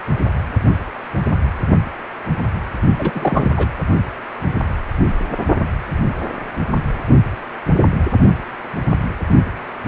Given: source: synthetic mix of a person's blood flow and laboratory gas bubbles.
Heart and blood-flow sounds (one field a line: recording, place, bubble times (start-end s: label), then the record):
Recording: Doppler ultrasound of blood flow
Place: precordium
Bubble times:
2.98-3.50 s: bubbles
3.56-3.69 s: bubbles
From the record:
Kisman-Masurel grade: 222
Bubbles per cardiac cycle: several, 3 to 8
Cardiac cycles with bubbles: 10 to 50%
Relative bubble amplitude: moderate (0.250 to 0.450)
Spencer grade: 2 (many but less than half of the cardiac periods contain bubble signals, singularly or in groups)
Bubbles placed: only in the low amplitude regions of the cardiac cycle